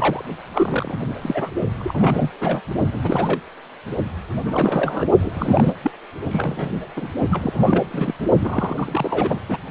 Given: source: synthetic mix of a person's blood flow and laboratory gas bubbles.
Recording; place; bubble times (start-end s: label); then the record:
Doppler ultrasound of blood flow; precordium
0.00-0.25 s: bubbles
0.53-1.07 s: bubbles
1.22-1.50 s: bubbles
1.78-2.31 s: bubbles
2.40-2.60 s: bubbles
2.92-3.42 s: bubbles
4.45-5.05 s: bubbles
5.18-5.72 s: bubbles
5.82-5.90 s: bubbles
6.30-6.71 s: bubbles
6.96-7.08 s: bubbles
7.28-7.85 s: bubbles
7.90-8.14 s: bubbles
8.40-9.40 s: bubbles
9.48-9.59 s: bubbles
From the record:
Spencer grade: 3 (all of the cardiac periods contain showers or single bubble signals, but not dominating or overriding the cardiac motion signals); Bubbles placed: only in the low amplitude regions of the cardiac cycle